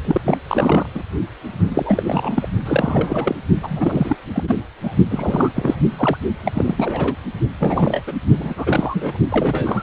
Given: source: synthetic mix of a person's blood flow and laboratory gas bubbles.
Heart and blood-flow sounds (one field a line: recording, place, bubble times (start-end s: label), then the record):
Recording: Doppler ultrasound of blood flow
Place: precordium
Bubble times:
0.04-0.21 s: bubbles
0.26-0.38 s: bubbles
0.48-0.88 s: bubbles
0.94-1.02 s: bubbles
1.68-2.48 s: bubbles
2.65-3.35 s: bubbles
3.60-4.17 s: bubbles
4.35-4.44 s: bubbles
4.47-4.56 s: bubbles
4.83-4.93 s: bubbles
5.10-5.51 s: bubbles
5.56-5.76 s: bubbles
5.97-6.18 s: bubbles
6.46-6.52 s: bubbles
6.54-6.75 s: bubbles
6.77-7.16 s: bubbles
7.60-8.03 s: bubbles
8.07-8.12 s: bubbles
8.38-9.18 s: bubbles
9.30-9.83 s: bubbles
From the record:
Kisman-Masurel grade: 342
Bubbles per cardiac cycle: rolling drumbeat, 9 or more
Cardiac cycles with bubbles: 100%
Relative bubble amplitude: moderate (0.250 to 0.450)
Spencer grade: 3 (all of the cardiac periods contain showers or single bubble signals, but not dominating or overriding the cardiac motion signals)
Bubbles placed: only in the low amplitude regions of the cardiac cycle